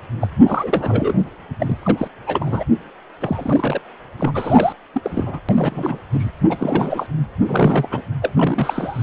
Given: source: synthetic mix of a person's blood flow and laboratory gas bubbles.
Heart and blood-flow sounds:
Doppler ultrasound of blood flow; precordium
0.21-0.28 s: bubbles
0.44-1.29 s: bubbles
1.60-1.77 s: bubbles
1.83-2.08 s: bubbles
2.27-2.65 s: bubbles
3.20-3.81 s: bubbles
4.18-4.31 s: bubbles
4.34-4.72 s: bubbles
4.94-5.01 s: bubbles
5.03-5.40 s: bubbles
5.48-5.98 s: bubbles
6.12-6.29 s: bubbles
6.49-7.07 s: bubbles
7.46-8.04 s: bubbles
8.21-9.03 s: bubbles
From the record:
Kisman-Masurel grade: 342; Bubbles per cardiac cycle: rolling drumbeat, 9 or more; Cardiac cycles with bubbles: 100%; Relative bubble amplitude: moderate (0.250 to 0.450); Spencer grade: 3 (all of the cardiac periods contain showers or single bubble signals, but not dominating or overriding the cardiac motion signals); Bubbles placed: anywhere in the cardiac cycle

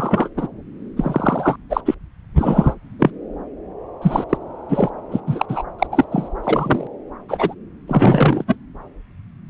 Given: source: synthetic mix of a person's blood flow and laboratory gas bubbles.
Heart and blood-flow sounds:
Doppler ultrasound of blood flow; subclavian vein
0.00-0.28 s: bubbles
0.36-0.48 s: bubbles
0.96-1.56 s: bubbles
1.69-1.81 s: bubbles
1.85-1.94 s: bubbles
2.38-2.75 s: bubbles
2.99-3.10 s: bubbles
4.02-4.24 s: bubbles
4.29-4.37 s: bubbles
4.69-4.90 s: bubbles
5.11-5.21 s: bubbles
5.26-5.46 s: bubbles
5.48-5.63 s: bubbles
5.79-5.87 s: bubbles
5.92-6.05 s: bubbles
6.11-6.29 s: bubbles
6.43-6.87 s: bubbles
7.29-7.54 s: bubbles
7.88-8.45 s: bubbles
8.47-8.56 s: bubbles
From the record:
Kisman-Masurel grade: 233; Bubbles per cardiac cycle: several, 3 to 8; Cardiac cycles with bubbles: 50 to 99%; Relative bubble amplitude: loud (0.450 to 0.775); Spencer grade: 3 (all of the cardiac periods contain showers or single bubble signals, but not dominating or overriding the cardiac motion signals); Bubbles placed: anywhere in the cardiac cycle

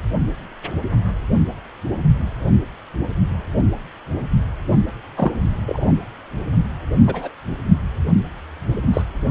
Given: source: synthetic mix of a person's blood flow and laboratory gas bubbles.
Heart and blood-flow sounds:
Doppler ultrasound of blood flow; precordium
5.17-5.32 s: bubbles
5.65-5.91 s: bubbles
7.07-7.29 s: bubbles
8.93-9.03 s: bubbles
From the record:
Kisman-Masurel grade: 123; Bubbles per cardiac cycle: 1 to 2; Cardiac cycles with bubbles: 10 to 50%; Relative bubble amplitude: loud (0.450 to 0.775); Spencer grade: 2 (many but less than half of the cardiac periods contain bubble signals, singularly or in groups); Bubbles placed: only in the low amplitude regions of the cardiac cycle

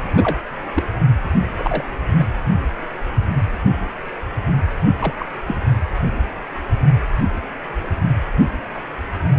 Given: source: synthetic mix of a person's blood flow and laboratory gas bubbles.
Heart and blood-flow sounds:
Doppler ultrasound of blood flow; precordium
0.14-0.38 s: bubbles
0.75-0.84 s: bubbles
1.58-1.84 s: bubbles
2.20-2.25 s: bubbles
5.00-5.13 s: bubbles
5.19-5.26 s: bubbles
5.47-5.56 s: bubbles
From the record:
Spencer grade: 2 (many but less than half of the cardiac periods contain bubble signals, singularly or in groups); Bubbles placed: anywhere in the cardiac cycle

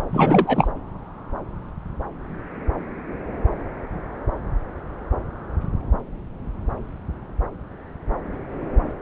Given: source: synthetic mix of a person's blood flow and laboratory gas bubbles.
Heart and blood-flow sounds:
Doppler ultrasound of blood flow; subclavian vein
0.12-0.69 s: bubbles
From the record:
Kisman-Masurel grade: 213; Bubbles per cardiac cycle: several, 3 to 8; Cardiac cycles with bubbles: 1 to 10%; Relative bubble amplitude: loud (0.450 to 0.775); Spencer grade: 1 (occasional bubble signal discernible with the cardiac motion signal, with majority of cardiac periods free of bubbles); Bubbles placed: anywhere in the cardiac cycle

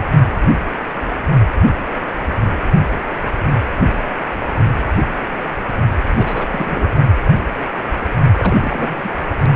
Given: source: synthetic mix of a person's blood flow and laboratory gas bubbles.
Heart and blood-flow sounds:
Doppler ultrasound of blood flow; precordium
6.17-6.46 s: bubbles
6.51-6.89 s: bubbles
8.35-9.09 s: bubbles
From the record:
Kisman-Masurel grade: 222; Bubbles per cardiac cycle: several, 3 to 8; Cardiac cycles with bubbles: 10 to 50%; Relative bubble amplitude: moderate (0.250 to 0.450); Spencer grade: 2 (many but less than half of the cardiac periods contain bubble signals, singularly or in groups); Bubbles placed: only in the low amplitude regions of the cardiac cycle

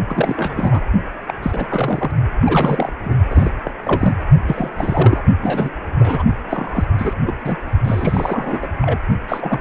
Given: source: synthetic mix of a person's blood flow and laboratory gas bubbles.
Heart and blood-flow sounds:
Doppler ultrasound of blood flow; precordium
0.09-0.82 s: bubbles
1.27-1.34 s: bubbles
1.42-1.67 s: bubbles
1.69-2.11 s: bubbles
2.40-2.92 s: bubbles
3.04-3.16 s: bubbles
3.30-3.51 s: bubbles
3.64-3.75 s: bubbles
3.83-4.17 s: bubbles
4.47-5.22 s: bubbles
5.41-5.70 s: bubbles
5.99-6.23 s: bubbles
6.50-6.85 s: bubbles
6.98-7.13 s: bubbles
7.26-7.33 s: bubbles
7.43-7.58 s: bubbles
7.83-8.67 s: bubbles
8.81-9.06 s: bubbles
9.28-9.61 s: bubbles
From the record:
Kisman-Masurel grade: 342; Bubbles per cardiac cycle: rolling drumbeat, 9 or more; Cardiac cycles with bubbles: 100%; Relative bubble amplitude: moderate (0.250 to 0.450); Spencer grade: 3 (all of the cardiac periods contain showers or single bubble signals, but not dominating or overriding the cardiac motion signals); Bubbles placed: only in the low amplitude regions of the cardiac cycle

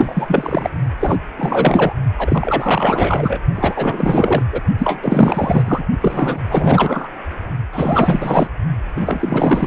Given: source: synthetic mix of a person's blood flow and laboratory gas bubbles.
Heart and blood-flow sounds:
Doppler ultrasound of blood flow; precordium
0.00-0.69 s: bubbles
0.99-1.18 s: bubbles
1.37-1.92 s: bubbles
2.17-3.39 s: bubbles
3.55-4.43 s: bubbles
4.52-4.62 s: bubbles
4.78-5.86 s: bubbles
6.01-6.40 s: bubbles
6.49-7.08 s: bubbles
7.72-8.47 s: bubbles
8.96-9.67 s: bubbles
From the record:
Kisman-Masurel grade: 444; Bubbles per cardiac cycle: continuous sound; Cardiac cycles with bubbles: 100%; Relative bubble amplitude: maximal (0.775 to 0.999); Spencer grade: 4 (maximum detectable bubble signal sounding continuously throughout systole and diastole of every cardiac period, and overriding the amplitude of the normal cardiac signals); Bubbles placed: only in the low amplitude regions of the cardiac cycle

